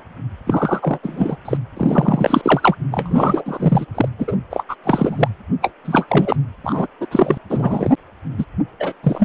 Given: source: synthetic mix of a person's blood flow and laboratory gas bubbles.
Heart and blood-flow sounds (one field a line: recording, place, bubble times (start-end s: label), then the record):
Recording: Doppler ultrasound of blood flow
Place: precordium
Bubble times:
0.46-0.99 s: bubbles
1.02-1.37 s: bubbles
1.45-1.57 s: bubbles
1.76-2.76 s: bubbles
2.91-3.85 s: bubbles
3.94-4.08 s: bubbles
4.18-4.38 s: bubbles
4.50-4.63 s: bubbles
4.68-4.75 s: bubbles
4.83-5.28 s: bubbles
5.61-5.72 s: bubbles
5.84-6.36 s: bubbles
6.63-6.87 s: bubbles
7.00-7.06 s: bubbles
7.11-7.38 s: bubbles
7.50-7.96 s: bubbles
8.38-8.45 s: bubbles
8.79-8.93 s: bubbles
9.03-9.25 s: bubbles
From the record:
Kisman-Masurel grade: 343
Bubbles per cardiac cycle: rolling drumbeat, 9 or more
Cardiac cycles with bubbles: 100%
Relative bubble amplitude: loud (0.450 to 0.775)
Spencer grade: 3 (all of the cardiac periods contain showers or single bubble signals, but not dominating or overriding the cardiac motion signals)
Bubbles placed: anywhere in the cardiac cycle